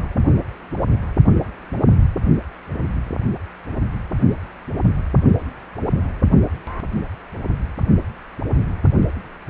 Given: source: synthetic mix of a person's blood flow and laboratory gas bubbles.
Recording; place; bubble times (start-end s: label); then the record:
Doppler ultrasound of blood flow; precordium
no bubbles
From the record:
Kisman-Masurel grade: 000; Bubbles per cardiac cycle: 0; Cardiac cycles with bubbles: 0%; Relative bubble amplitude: no bubbles discernible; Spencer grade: 0 (complete lack of bubble signals)